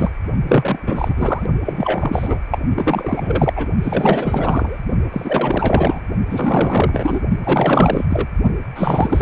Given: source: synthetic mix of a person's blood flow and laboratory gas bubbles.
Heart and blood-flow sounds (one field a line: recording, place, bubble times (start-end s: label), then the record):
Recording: Doppler ultrasound of blood flow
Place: precordium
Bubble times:
0.00-0.11 s: bubbles
0.47-0.79 s: bubbles
0.87-1.46 s: bubbles
1.66-2.40 s: bubbles
2.51-2.58 s: bubbles
2.70-3.53 s: bubbles
3.56-3.67 s: bubbles
3.82-4.78 s: bubbles
5.12-6.00 s: bubbles
6.29-7.21 s: bubbles
7.43-8.05 s: bubbles
8.09-8.27 s: bubbles
8.75-9.22 s: bubbles
From the record:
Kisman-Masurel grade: 444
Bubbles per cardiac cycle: continuous sound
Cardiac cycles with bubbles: 100%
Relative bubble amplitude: maximal (0.775 to 0.999)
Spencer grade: 4 (maximum detectable bubble signal sounding continuously throughout systole and diastole of every cardiac period, and overriding the amplitude of the normal cardiac signals)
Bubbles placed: only in the low amplitude regions of the cardiac cycle